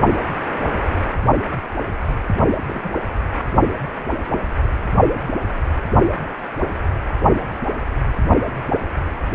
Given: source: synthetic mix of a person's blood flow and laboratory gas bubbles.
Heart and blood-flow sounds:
Doppler ultrasound of blood flow; precordium
2.67-2.91 s: bubbles
From the record:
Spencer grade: 1 (occasional bubble signal discernible with the cardiac motion signal, with majority of cardiac periods free of bubbles); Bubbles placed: only in the low amplitude regions of the cardiac cycle

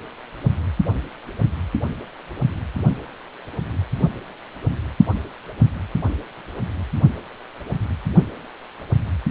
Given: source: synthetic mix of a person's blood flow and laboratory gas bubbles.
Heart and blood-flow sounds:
Doppler ultrasound of blood flow; precordium
no bubbles
From the record:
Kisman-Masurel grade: 000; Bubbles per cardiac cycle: 0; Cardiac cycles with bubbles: 0%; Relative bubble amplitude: no bubbles discernible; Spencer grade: 0 (complete lack of bubble signals)

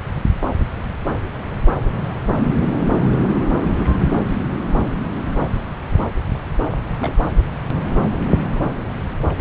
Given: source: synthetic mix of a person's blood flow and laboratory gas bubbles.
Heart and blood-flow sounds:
Doppler ultrasound of blood flow; subclavian vein
6.99-7.13 s: bubbles
From the record:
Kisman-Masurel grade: 112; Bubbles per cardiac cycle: 1 to 2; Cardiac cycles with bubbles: 1 to 10%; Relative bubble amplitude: moderate (0.250 to 0.450); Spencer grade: 1 (occasional bubble signal discernible with the cardiac motion signal, with majority of cardiac periods free of bubbles); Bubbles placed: anywhere in the cardiac cycle

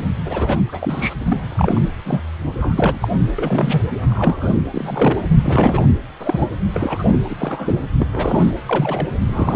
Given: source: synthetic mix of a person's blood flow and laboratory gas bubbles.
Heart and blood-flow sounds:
Doppler ultrasound of blood flow; precordium
0.24-0.60 s: bubbles
0.67-1.15 s: bubbles
1.26-1.45 s: bubbles
1.48-1.82 s: bubbles
2.05-2.22 s: bubbles
2.58-2.99 s: bubbles
3.02-3.08 s: bubbles
3.38-3.82 s: bubbles
4.08-4.62 s: bubbles
4.74-5.30 s: bubbles
5.41-5.87 s: bubbles
6.20-6.46 s: bubbles
6.74-7.09 s: bubbles
7.12-7.17 s: bubbles
7.29-7.36 s: bubbles
7.38-7.79 s: bubbles
7.99-8.06 s: bubbles
8.11-8.55 s: bubbles
8.69-9.08 s: bubbles
9.27-9.56 s: bubbles
From the record:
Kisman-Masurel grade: 242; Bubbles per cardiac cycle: several, 3 to 8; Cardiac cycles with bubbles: 100%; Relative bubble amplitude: moderate (0.250 to 0.450); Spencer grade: 3 (all of the cardiac periods contain showers or single bubble signals, but not dominating or overriding the cardiac motion signals); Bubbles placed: anywhere in the cardiac cycle

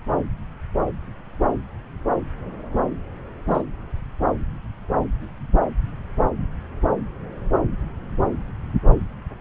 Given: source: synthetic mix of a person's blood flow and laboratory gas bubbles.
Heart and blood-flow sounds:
Doppler ultrasound of blood flow; subclavian vein
3.46-3.63 s: bubbles
From the record:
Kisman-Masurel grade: 111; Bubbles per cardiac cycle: 1 to 2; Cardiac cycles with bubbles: 1 to 10%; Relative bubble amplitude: barely perceptible (0.100 to 0.250); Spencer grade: 1 (occasional bubble signal discernible with the cardiac motion signal, with majority of cardiac periods free of bubbles); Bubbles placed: anywhere in the cardiac cycle

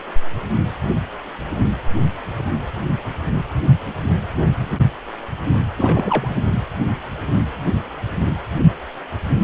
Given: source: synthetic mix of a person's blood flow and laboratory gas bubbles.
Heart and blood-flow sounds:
Doppler ultrasound of blood flow; precordium
5.77-6.34 s: bubbles
From the record:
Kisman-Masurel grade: 212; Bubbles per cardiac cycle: several, 3 to 8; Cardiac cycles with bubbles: 1 to 10%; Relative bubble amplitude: moderate (0.250 to 0.450); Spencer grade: 1 (occasional bubble signal discernible with the cardiac motion signal, with majority of cardiac periods free of bubbles); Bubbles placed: anywhere in the cardiac cycle

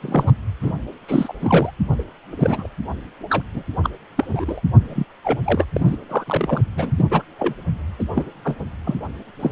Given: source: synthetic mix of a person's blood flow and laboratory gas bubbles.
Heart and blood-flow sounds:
Doppler ultrasound of blood flow; precordium
0.01-0.33 s: bubbles
0.62-0.72 s: bubbles
1.08-1.33 s: bubbles
1.40-1.71 s: bubbles
1.99-2.04 s: bubbles
2.31-2.68 s: bubbles
3.29-3.43 s: bubbles
3.54-3.63 s: bubbles
3.83-3.90 s: bubbles
4.17-4.61 s: bubbles
4.88-5.04 s: bubbles
5.24-5.39 s: bubbles
5.45-5.65 s: bubbles
5.76-5.98 s: bubbles
6.09-6.24 s: bubbles
6.26-6.61 s: bubbles
6.76-6.92 s: bubbles
6.98-7.05 s: bubbles
7.11-7.22 s: bubbles
7.38-7.54 s: bubbles
7.99-8.03 s: bubbles
8.15-8.24 s: bubbles
8.44-8.55 s: bubbles
8.84-8.95 s: bubbles
9.39-9.51 s: bubbles
From the record:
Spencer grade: 3 (all of the cardiac periods contain showers or single bubble signals, but not dominating or overriding the cardiac motion signals); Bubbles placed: anywhere in the cardiac cycle

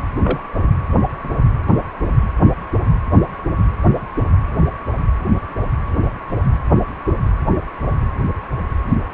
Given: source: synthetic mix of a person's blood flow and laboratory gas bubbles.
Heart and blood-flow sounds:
Doppler ultrasound of blood flow; precordium
0.22-0.40 s: bubbles
From the record:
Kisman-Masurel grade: 112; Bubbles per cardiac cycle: 1 to 2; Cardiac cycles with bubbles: 1 to 10%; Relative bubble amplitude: moderate (0.250 to 0.450); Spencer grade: 1 (occasional bubble signal discernible with the cardiac motion signal, with majority of cardiac periods free of bubbles); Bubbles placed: anywhere in the cardiac cycle

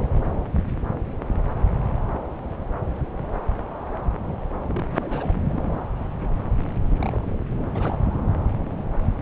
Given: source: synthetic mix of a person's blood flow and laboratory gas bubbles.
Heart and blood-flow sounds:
Doppler ultrasound of blood flow; subclavian vein
4.67-4.85 s: bubbles
4.97-5.41 s: bubbles
5.48-5.73 s: bubbles
6.97-7.38 s: bubbles
7.74-7.97 s: bubbles
From the record:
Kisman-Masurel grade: 221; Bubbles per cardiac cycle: several, 3 to 8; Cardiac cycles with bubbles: 10 to 50%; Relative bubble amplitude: barely perceptible (0.100 to 0.250); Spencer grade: 2 (many but less than half of the cardiac periods contain bubble signals, singularly or in groups); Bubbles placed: anywhere in the cardiac cycle

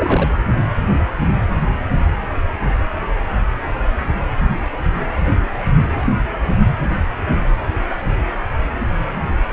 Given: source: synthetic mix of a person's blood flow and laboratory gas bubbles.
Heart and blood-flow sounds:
Doppler ultrasound of blood flow; precordium
0.00-0.28 s: bubbles
From the record:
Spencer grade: 1 (occasional bubble signal discernible with the cardiac motion signal, with majority of cardiac periods free of bubbles); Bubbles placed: anywhere in the cardiac cycle

